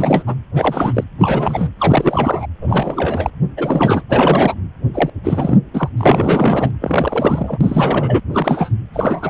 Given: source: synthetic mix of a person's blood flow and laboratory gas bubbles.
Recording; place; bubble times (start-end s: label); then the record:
Doppler ultrasound of blood flow; precordium
0.00-0.23 s: bubbles
0.27-0.35 s: bubbles
0.54-1.04 s: bubbles
1.19-1.70 s: bubbles
1.79-2.46 s: bubbles
2.61-3.30 s: bubbles
3.57-4.04 s: bubbles
4.09-4.54 s: bubbles
4.93-5.10 s: bubbles
5.24-5.58 s: bubbles
5.74-5.89 s: bubbles
5.97-6.71 s: bubbles
6.81-7.58 s: bubbles
7.60-8.20 s: bubbles
8.33-8.72 s: bubbles
8.94-9.30 s: bubbles
From the record:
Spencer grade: 3 (all of the cardiac periods contain showers or single bubble signals, but not dominating or overriding the cardiac motion signals); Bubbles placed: anywhere in the cardiac cycle